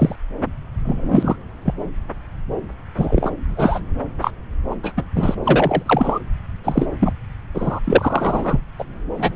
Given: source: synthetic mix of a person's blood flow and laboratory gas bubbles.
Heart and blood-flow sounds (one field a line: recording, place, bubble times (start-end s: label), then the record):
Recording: Doppler ultrasound of blood flow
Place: subclavian vein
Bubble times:
0.00-0.16 s: bubbles
0.85-1.36 s: bubbles
1.65-1.74 s: bubbles
2.96-3.31 s: bubbles
3.49-3.81 s: bubbles
4.21-4.31 s: bubbles
4.70-4.75 s: bubbles
4.83-4.94 s: bubbles
4.97-5.04 s: bubbles
5.15-5.35 s: bubbles
5.43-5.82 s: bubbles
5.85-6.19 s: bubbles
6.63-6.86 s: bubbles
6.99-7.13 s: bubbles
7.54-7.80 s: bubbles
7.84-8.60 s: bubbles
8.79-8.85 s: bubbles
9.17-9.36 s: bubbles
From the record:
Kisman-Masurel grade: 243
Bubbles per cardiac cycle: several, 3 to 8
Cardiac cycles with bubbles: 100%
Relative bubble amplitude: loud (0.450 to 0.775)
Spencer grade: 3 (all of the cardiac periods contain showers or single bubble signals, but not dominating or overriding the cardiac motion signals)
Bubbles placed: anywhere in the cardiac cycle